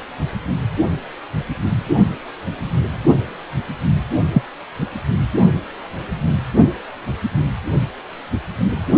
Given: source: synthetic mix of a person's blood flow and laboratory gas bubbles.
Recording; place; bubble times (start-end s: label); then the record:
Doppler ultrasound of blood flow; precordium
4.33-4.42 s: bubbles
From the record:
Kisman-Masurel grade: 123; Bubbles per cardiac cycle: 1 to 2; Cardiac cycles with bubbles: 10 to 50%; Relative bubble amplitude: loud (0.450 to 0.775); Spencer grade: 2 (many but less than half of the cardiac periods contain bubble signals, singularly or in groups); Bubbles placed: only in the low amplitude regions of the cardiac cycle